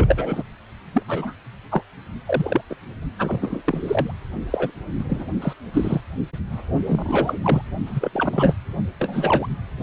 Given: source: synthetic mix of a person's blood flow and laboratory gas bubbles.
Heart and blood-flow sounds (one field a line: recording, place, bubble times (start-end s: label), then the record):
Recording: Doppler ultrasound of blood flow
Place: precordium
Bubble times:
0.00-0.43 s: bubbles
0.92-1.02 s: bubbles
1.07-1.33 s: bubbles
1.71-1.83 s: bubbles
2.25-2.61 s: bubbles
2.69-2.75 s: bubbles
3.19-3.62 s: bubbles
3.65-4.15 s: bubbles
4.50-4.71 s: bubbles
4.98-5.26 s: bubbles
5.42-5.53 s: bubbles
5.73-6.01 s: bubbles
6.86-7.40 s: bubbles
7.43-7.62 s: bubbles
7.86-8.54 s: bubbles
8.99-9.47 s: bubbles
From the record:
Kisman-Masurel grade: 232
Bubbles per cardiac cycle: several, 3 to 8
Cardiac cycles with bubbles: 50 to 99%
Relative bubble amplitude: moderate (0.250 to 0.450)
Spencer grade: 3 (all of the cardiac periods contain showers or single bubble signals, but not dominating or overriding the cardiac motion signals)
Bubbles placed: only in the low amplitude regions of the cardiac cycle